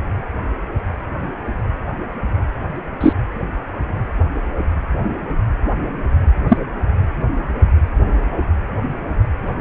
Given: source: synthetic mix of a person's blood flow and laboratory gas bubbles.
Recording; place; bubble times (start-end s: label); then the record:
Doppler ultrasound of blood flow; precordium
3.00-3.12 s: bubbles
6.48-6.58 s: bubbles
From the record:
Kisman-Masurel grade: 123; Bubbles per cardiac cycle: 1 to 2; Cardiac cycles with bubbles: 10 to 50%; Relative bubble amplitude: loud (0.450 to 0.775); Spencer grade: 2 (many but less than half of the cardiac periods contain bubble signals, singularly or in groups); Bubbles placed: anywhere in the cardiac cycle